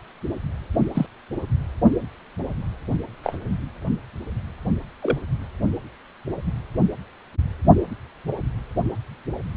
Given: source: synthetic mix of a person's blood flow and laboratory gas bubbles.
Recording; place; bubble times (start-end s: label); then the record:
Doppler ultrasound of blood flow; precordium
0.94-1.06 s: bubbles
3.23-3.39 s: bubbles
5.02-5.18 s: bubbles
From the record:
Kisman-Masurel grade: 122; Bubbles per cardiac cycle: 1 to 2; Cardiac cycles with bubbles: 10 to 50%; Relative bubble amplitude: moderate (0.250 to 0.450); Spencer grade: 2 (many but less than half of the cardiac periods contain bubble signals, singularly or in groups); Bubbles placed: anywhere in the cardiac cycle